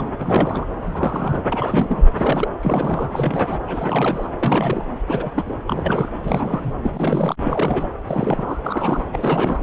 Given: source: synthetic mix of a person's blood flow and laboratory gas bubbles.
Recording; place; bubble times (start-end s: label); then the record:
Doppler ultrasound of blood flow; subclavian vein
0.00-0.07 s: bubbles
0.19-0.66 s: bubbles
0.82-1.41 s: bubbles
1.52-2.02 s: bubbles
2.16-2.49 s: bubbles
2.63-3.58 s: bubbles
3.67-4.27 s: bubbles
4.34-4.84 s: bubbles
5.07-5.31 s: bubbles
5.34-5.56 s: bubbles
5.67-6.10 s: bubbles
6.22-6.73 s: bubbles
6.82-7.35 s: bubbles
7.43-7.86 s: bubbles
8.07-8.59 s: bubbles
8.64-9.07 s: bubbles
9.12-9.62 s: bubbles
From the record:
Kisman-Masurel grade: 342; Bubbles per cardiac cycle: rolling drumbeat, 9 or more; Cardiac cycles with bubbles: 100%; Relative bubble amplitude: moderate (0.250 to 0.450); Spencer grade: 3 (all of the cardiac periods contain showers or single bubble signals, but not dominating or overriding the cardiac motion signals); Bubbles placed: anywhere in the cardiac cycle